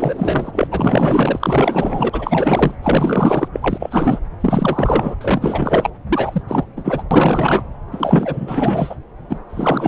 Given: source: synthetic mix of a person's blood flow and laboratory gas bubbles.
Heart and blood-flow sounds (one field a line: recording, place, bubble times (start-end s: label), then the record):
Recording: Doppler ultrasound of blood flow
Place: subclavian vein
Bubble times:
0.00-0.67 s: bubbles
0.70-2.10 s: bubbles
2.12-2.77 s: bubbles
2.83-3.48 s: bubbles
3.52-4.20 s: bubbles
4.40-5.15 s: bubbles
5.21-5.90 s: bubbles
6.09-6.42 s: bubbles
6.47-6.66 s: bubbles
6.76-7.02 s: bubbles
7.10-7.63 s: bubbles
7.92-8.96 s: bubbles
9.29-9.40 s: bubbles
9.49-9.88 s: bubbles
From the record:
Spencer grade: 4 (maximum detectable bubble signal sounding continuously throughout systole and diastole of every cardiac period, and overriding the amplitude of the normal cardiac signals)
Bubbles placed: anywhere in the cardiac cycle